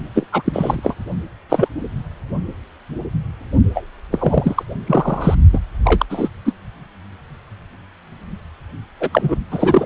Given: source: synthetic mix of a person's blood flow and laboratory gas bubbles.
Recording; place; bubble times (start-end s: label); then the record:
Doppler ultrasound of blood flow; precordium
0.15-0.26 s: bubbles
0.32-0.80 s: bubbles
0.83-0.94 s: bubbles
1.49-1.68 s: bubbles
3.74-3.84 s: bubbles
4.12-4.63 s: bubbles
4.87-5.35 s: bubbles
5.53-5.59 s: bubbles
5.85-6.06 s: bubbles
6.10-6.29 s: bubbles
6.45-6.53 s: bubbles
9.00-9.37 s: bubbles
9.51-9.86 s: bubbles
From the record:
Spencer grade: 3 (all of the cardiac periods contain showers or single bubble signals, but not dominating or overriding the cardiac motion signals); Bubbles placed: only in the low amplitude regions of the cardiac cycle